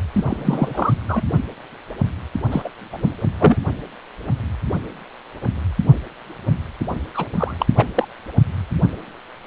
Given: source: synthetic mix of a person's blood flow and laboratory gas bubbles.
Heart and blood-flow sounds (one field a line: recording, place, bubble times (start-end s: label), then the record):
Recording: Doppler ultrasound of blood flow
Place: precordium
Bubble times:
0.13-0.24 s: bubbles
0.27-0.93 s: bubbles
1.08-1.23 s: bubbles
2.52-2.69 s: bubbles
2.93-2.98 s: bubbles
3.02-3.14 s: bubbles
3.39-3.56 s: bubbles
7.14-7.25 s: bubbles
7.37-7.54 s: bubbles
7.59-7.66 s: bubbles
7.77-8.08 s: bubbles
From the record:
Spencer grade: 2 (many but less than half of the cardiac periods contain bubble signals, singularly or in groups)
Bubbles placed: only in the low amplitude regions of the cardiac cycle